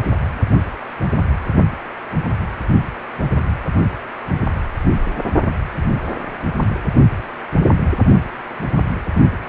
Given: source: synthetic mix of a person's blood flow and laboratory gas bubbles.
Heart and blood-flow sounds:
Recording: Doppler ultrasound of blood flow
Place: precordium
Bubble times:
3.18-3.29 s: bubbles
3.34-3.46 s: bubbles
From the record:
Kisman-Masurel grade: 111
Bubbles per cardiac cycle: 1 to 2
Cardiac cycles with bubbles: 1 to 10%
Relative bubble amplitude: barely perceptible (0.100 to 0.250)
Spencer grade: 1 (occasional bubble signal discernible with the cardiac motion signal, with majority of cardiac periods free of bubbles)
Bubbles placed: only in the low amplitude regions of the cardiac cycle

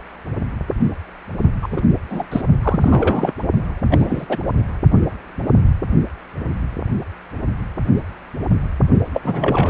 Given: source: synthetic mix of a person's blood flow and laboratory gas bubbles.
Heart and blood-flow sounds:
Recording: Doppler ultrasound of blood flow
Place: precordium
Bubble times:
1.62-1.81 s: bubbles
2.10-2.25 s: bubbles
2.31-2.41 s: bubbles
2.63-3.32 s: bubbles
3.90-4.26 s: bubbles
4.30-4.38 s: bubbles
9.13-9.21 s: bubbles
9.24-9.70 s: bubbles
From the record:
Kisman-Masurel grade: 223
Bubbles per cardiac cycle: several, 3 to 8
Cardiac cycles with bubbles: 10 to 50%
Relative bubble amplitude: loud (0.450 to 0.775)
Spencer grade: 2 (many but less than half of the cardiac periods contain bubble signals, singularly or in groups)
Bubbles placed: only in the low amplitude regions of the cardiac cycle

